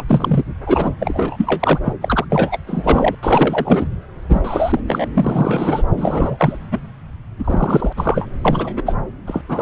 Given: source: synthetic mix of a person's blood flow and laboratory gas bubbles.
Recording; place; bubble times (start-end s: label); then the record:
Doppler ultrasound of blood flow; subclavian vein
0.00-0.04 s: bubbles
0.08-0.44 s: bubbles
0.66-0.90 s: bubbles
1.00-1.79 s: bubbles
1.85-1.94 s: bubbles
2.01-2.25 s: bubbles
2.29-2.58 s: bubbles
2.67-3.15 s: bubbles
3.23-3.88 s: bubbles
4.29-4.42 s: bubbles
4.44-4.79 s: bubbles
4.88-5.06 s: bubbles
5.14-5.83 s: bubbles
5.97-6.58 s: bubbles
6.71-6.79 s: bubbles
7.39-7.93 s: bubbles
7.97-8.29 s: bubbles
8.45-8.73 s: bubbles
8.77-8.82 s: bubbles
8.86-8.95 s: bubbles
9.27-9.41 s: bubbles
9.48-9.62 s: bubbles
From the record:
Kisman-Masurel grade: 333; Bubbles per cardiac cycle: rolling drumbeat, 9 or more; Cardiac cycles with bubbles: 50 to 99%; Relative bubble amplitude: loud (0.450 to 0.775); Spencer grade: 3 (all of the cardiac periods contain showers or single bubble signals, but not dominating or overriding the cardiac motion signals); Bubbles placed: anywhere in the cardiac cycle